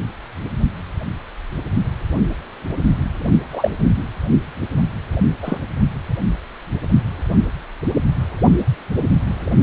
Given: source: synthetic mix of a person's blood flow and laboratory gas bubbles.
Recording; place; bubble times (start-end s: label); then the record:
Doppler ultrasound of blood flow; precordium
3.52-3.71 s: bubbles
5.42-5.58 s: bubbles
From the record:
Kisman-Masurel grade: 123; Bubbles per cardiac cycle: 1 to 2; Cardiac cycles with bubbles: 10 to 50%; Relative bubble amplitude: loud (0.450 to 0.775); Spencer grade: 2 (many but less than half of the cardiac periods contain bubble signals, singularly or in groups); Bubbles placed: anywhere in the cardiac cycle